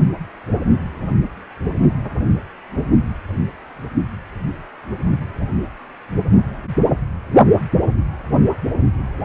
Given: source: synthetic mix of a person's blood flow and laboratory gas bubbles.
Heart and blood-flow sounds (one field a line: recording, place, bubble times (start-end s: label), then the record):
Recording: Doppler ultrasound of blood flow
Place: precordium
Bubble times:
no bubbles
From the record:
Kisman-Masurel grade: 000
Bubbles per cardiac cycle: 0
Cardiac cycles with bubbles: 0%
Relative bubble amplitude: no bubbles discernible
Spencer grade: 0 (complete lack of bubble signals)